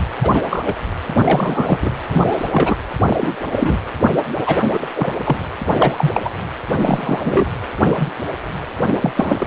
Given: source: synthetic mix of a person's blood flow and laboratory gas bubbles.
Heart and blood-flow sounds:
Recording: Doppler ultrasound of blood flow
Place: precordium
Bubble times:
0.22-0.43 s: bubbles
0.50-0.76 s: bubbles
1.14-1.90 s: bubbles
2.07-2.75 s: bubbles
3.07-3.17 s: bubbles
3.19-3.35 s: bubbles
3.55-3.77 s: bubbles
4.46-4.59 s: bubbles
4.72-4.87 s: bubbles
4.93-5.20 s: bubbles
5.25-5.37 s: bubbles
5.79-6.30 s: bubbles
6.81-7.47 s: bubbles
7.79-8.10 s: bubbles
9.01-9.12 s: bubbles
9.15-9.47 s: bubbles
From the record:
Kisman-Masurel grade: 243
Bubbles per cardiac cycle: several, 3 to 8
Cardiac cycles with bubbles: 100%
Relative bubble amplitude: loud (0.450 to 0.775)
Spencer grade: 3 (all of the cardiac periods contain showers or single bubble signals, but not dominating or overriding the cardiac motion signals)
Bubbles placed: anywhere in the cardiac cycle

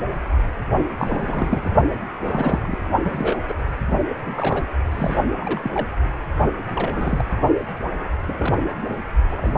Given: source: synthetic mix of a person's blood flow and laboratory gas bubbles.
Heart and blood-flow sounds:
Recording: Doppler ultrasound of blood flow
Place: precordium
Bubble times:
0.00-0.02 s: bubbles
0.99-1.72 s: bubbles
2.24-2.77 s: bubbles
3.02-3.43 s: bubbles
3.48-3.54 s: bubbles
4.25-4.67 s: bubbles
4.92-5.17 s: bubbles
5.41-5.87 s: bubbles
6.67-7.25 s: bubbles
8.28-8.35 s: bubbles
8.39-8.74 s: bubbles
9.29-9.58 s: bubbles
From the record:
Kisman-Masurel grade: 242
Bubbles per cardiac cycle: several, 3 to 8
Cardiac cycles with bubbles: 100%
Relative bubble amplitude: moderate (0.250 to 0.450)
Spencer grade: 3 (all of the cardiac periods contain showers or single bubble signals, but not dominating or overriding the cardiac motion signals)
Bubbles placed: only in the low amplitude regions of the cardiac cycle

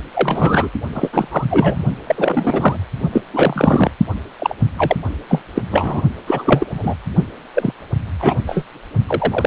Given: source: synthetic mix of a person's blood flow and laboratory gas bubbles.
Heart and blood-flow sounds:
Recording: Doppler ultrasound of blood flow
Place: precordium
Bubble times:
0.13-0.69 s: bubbles
0.93-1.09 s: bubbles
1.12-1.28 s: bubbles
1.31-1.45 s: bubbles
1.50-1.85 s: bubbles
2.06-2.78 s: bubbles
3.12-3.22 s: bubbles
3.33-3.91 s: bubbles
4.39-4.54 s: bubbles
4.78-4.96 s: bubbles
5.29-5.42 s: bubbles
5.54-5.62 s: bubbles
5.71-6.02 s: bubbles
6.27-6.70 s: bubbles
6.77-6.95 s: bubbles
7.54-7.74 s: bubbles
8.19-8.36 s: bubbles
8.46-8.63 s: bubbles
9.07-9.47 s: bubbles
From the record:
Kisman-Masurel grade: 233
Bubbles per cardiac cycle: several, 3 to 8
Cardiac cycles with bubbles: 50 to 99%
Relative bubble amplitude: loud (0.450 to 0.775)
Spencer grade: 3 (all of the cardiac periods contain showers or single bubble signals, but not dominating or overriding the cardiac motion signals)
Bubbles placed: only in the low amplitude regions of the cardiac cycle

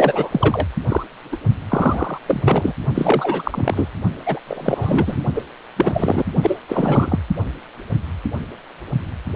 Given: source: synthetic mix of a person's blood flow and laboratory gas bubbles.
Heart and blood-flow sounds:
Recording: Doppler ultrasound of blood flow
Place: precordium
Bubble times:
0.00-0.67 s: bubbles
0.89-1.03 s: bubbles
1.31-1.36 s: bubbles
1.69-2.18 s: bubbles
2.26-2.72 s: bubbles
2.95-3.88 s: bubbles
4.26-4.39 s: bubbles
4.47-5.22 s: bubbles
5.35-5.42 s: bubbles
5.76-6.25 s: bubbles
6.42-6.59 s: bubbles
6.68-7.19 s: bubbles
From the record:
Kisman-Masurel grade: 333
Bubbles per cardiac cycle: rolling drumbeat, 9 or more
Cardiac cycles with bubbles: 50 to 99%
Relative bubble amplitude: loud (0.450 to 0.775)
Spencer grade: 3 (all of the cardiac periods contain showers or single bubble signals, but not dominating or overriding the cardiac motion signals)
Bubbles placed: only in the low amplitude regions of the cardiac cycle

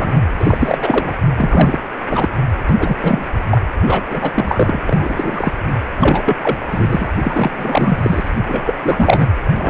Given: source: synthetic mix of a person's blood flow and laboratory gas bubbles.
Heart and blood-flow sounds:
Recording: Doppler ultrasound of blood flow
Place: precordium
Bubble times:
0.00-0.20 s: bubbles
0.40-1.25 s: bubbles
1.36-1.78 s: bubbles
2.09-2.29 s: bubbles
2.67-2.75 s: bubbles
2.79-2.96 s: bubbles
3.03-3.28 s: bubbles
3.51-3.61 s: bubbles
3.81-4.04 s: bubbles
4.09-4.31 s: bubbles
4.34-4.79 s: bubbles
4.88-5.52 s: bubbles
5.67-5.73 s: bubbles
5.99-6.22 s: bubbles
6.25-6.36 s: bubbles
6.42-6.59 s: bubbles
6.71-7.08 s: bubbles
7.23-7.51 s: bubbles
7.57-8.29 s: bubbles
8.46-8.75 s: bubbles
8.82-9.27 s: bubbles
9.51-9.70 s: bubbles
From the record:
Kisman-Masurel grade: 343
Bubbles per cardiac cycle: rolling drumbeat, 9 or more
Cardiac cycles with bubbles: 100%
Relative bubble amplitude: loud (0.450 to 0.775)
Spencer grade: 3 (all of the cardiac periods contain showers or single bubble signals, but not dominating or overriding the cardiac motion signals)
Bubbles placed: anywhere in the cardiac cycle

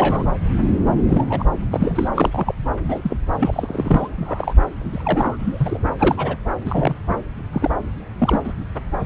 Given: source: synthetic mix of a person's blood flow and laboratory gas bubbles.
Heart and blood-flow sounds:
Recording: Doppler ultrasound of blood flow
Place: subclavian vein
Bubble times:
0.00-0.28 s: bubbles
0.97-1.03 s: bubbles
1.08-1.26 s: bubbles
1.29-1.46 s: bubbles
1.71-2.08 s: bubbles
2.15-2.54 s: bubbles
2.84-3.17 s: bubbles
3.39-4.08 s: bubbles
4.11-4.53 s: bubbles
4.80-5.36 s: bubbles
5.39-5.78 s: bubbles
5.98-6.36 s: bubbles
6.65-6.95 s: bubbles
7.08-7.23 s: bubbles
7.52-7.74 s: bubbles
8.19-8.41 s: bubbles
8.44-8.53 s: bubbles
From the record:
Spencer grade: 3 (all of the cardiac periods contain showers or single bubble signals, but not dominating or overriding the cardiac motion signals)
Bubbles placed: anywhere in the cardiac cycle

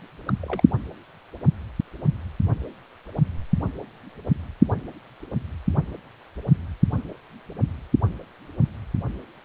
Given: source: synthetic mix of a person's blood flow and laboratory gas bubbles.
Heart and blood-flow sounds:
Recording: Doppler ultrasound of blood flow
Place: precordium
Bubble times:
0.26-0.33 s: bubbles
0.42-0.61 s: bubbles
From the record:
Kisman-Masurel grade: 111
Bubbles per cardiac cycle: 1 to 2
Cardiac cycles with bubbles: 1 to 10%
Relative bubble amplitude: barely perceptible (0.100 to 0.250)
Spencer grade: 1 (occasional bubble signal discernible with the cardiac motion signal, with majority of cardiac periods free of bubbles)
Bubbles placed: anywhere in the cardiac cycle

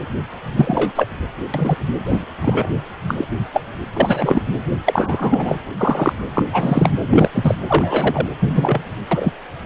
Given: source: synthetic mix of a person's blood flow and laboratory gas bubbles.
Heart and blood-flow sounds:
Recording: Doppler ultrasound of blood flow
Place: precordium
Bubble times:
0.56-0.92 s: bubbles
0.95-1.07 s: bubbles
1.53-1.77 s: bubbles
2.06-2.25 s: bubbles
2.41-2.71 s: bubbles
3.08-3.25 s: bubbles
3.52-3.61 s: bubbles
3.96-4.43 s: bubbles
4.86-5.58 s: bubbles
5.78-6.13 s: bubbles
6.33-6.43 s: bubbles
6.53-6.89 s: bubbles
7.10-7.29 s: bubbles
7.33-7.55 s: bubbles
7.68-8.27 s: bubbles
8.40-8.81 s: bubbles
9.11-9.31 s: bubbles
From the record:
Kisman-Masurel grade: 243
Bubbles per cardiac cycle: several, 3 to 8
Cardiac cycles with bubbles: 100%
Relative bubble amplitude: loud (0.450 to 0.775)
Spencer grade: 3 (all of the cardiac periods contain showers or single bubble signals, but not dominating or overriding the cardiac motion signals)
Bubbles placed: anywhere in the cardiac cycle

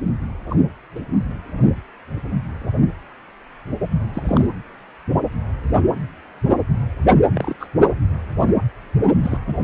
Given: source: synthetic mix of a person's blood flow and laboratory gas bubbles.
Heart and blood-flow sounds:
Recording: Doppler ultrasound of blood flow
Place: precordium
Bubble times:
0.49-0.56 s: bubbles
0.95-0.99 s: bubbles
4.14-4.47 s: bubbles
7.33-7.56 s: bubbles
7.60-7.68 s: bubbles
9.22-9.38 s: bubbles
9.47-9.54 s: bubbles
From the record:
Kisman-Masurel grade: 122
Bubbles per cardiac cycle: 1 to 2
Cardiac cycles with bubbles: 10 to 50%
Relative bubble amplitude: moderate (0.250 to 0.450)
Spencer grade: 2 (many but less than half of the cardiac periods contain bubble signals, singularly or in groups)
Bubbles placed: anywhere in the cardiac cycle

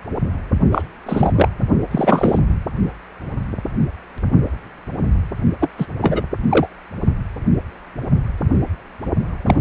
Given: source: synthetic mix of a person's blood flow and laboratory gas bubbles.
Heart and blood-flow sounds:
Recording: Doppler ultrasound of blood flow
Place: precordium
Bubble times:
0.71-0.83 s: bubbles
1.05-1.32 s: bubbles
1.35-1.48 s: bubbles
1.91-2.39 s: bubbles
5.60-5.70 s: bubbles
5.78-5.86 s: bubbles
6.01-6.25 s: bubbles
6.50-6.67 s: bubbles
9.45-9.56 s: bubbles
From the record:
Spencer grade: 2 (many but less than half of the cardiac periods contain bubble signals, singularly or in groups)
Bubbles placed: only in the low amplitude regions of the cardiac cycle

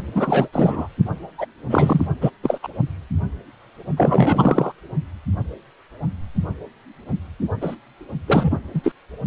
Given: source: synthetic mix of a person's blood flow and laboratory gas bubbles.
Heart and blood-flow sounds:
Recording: Doppler ultrasound of blood flow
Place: precordium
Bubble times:
0.15-0.48 s: bubbles
0.52-0.88 s: bubbles
1.38-1.46 s: bubbles
1.70-2.08 s: bubbles
2.21-2.31 s: bubbles
2.43-2.58 s: bubbles
2.62-2.68 s: bubbles
3.97-4.72 s: bubbles
7.61-7.76 s: bubbles
8.27-8.57 s: bubbles
8.74-8.92 s: bubbles
From the record:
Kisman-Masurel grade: 333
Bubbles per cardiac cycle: rolling drumbeat, 9 or more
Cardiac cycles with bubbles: 50 to 99%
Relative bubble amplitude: loud (0.450 to 0.775)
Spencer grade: 3 (all of the cardiac periods contain showers or single bubble signals, but not dominating or overriding the cardiac motion signals)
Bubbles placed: only in the low amplitude regions of the cardiac cycle

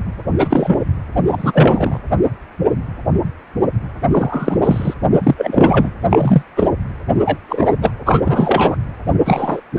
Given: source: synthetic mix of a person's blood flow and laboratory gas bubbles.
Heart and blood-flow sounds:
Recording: Doppler ultrasound of blood flow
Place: precordium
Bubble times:
0.38-0.78 s: bubbles
1.30-2.00 s: bubbles
4.12-4.57 s: bubbles
4.62-4.94 s: bubbles
5.11-5.21 s: bubbles
5.23-5.91 s: bubbles
6.10-6.42 s: bubbles
6.56-6.68 s: bubbles
7.25-7.38 s: bubbles
7.49-7.73 s: bubbles
7.81-7.91 s: bubbles
8.05-8.21 s: bubbles
8.25-8.76 s: bubbles
9.25-9.61 s: bubbles
9.76-9.79 s: bubbles
From the record:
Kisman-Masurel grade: 233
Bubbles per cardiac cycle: several, 3 to 8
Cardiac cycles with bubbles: 50 to 99%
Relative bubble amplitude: loud (0.450 to 0.775)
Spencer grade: 3 (all of the cardiac periods contain showers or single bubble signals, but not dominating or overriding the cardiac motion signals)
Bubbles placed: anywhere in the cardiac cycle

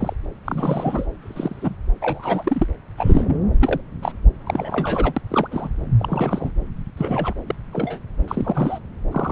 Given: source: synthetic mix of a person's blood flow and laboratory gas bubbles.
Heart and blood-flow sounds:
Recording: Doppler ultrasound of blood flow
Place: subclavian vein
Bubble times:
0.00-0.13 s: bubbles
0.45-1.07 s: bubbles
1.22-1.75 s: bubbles
2.01-2.67 s: bubbles
2.97-3.39 s: bubbles
3.60-3.81 s: bubbles
4.02-4.12 s: bubbles
4.46-5.13 s: bubbles
5.17-5.21 s: bubbles
5.29-5.48 s: bubbles
5.51-5.70 s: bubbles
5.98-6.50 s: bubbles
6.97-7.33 s: bubbles
7.46-7.55 s: bubbles
7.72-8.00 s: bubbles
8.28-8.79 s: bubbles
9.12-9.32 s: bubbles
From the record:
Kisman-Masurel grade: 232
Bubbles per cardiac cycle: several, 3 to 8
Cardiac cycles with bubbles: 50 to 99%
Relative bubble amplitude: moderate (0.250 to 0.450)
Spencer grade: 3 (all of the cardiac periods contain showers or single bubble signals, but not dominating or overriding the cardiac motion signals)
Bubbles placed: anywhere in the cardiac cycle

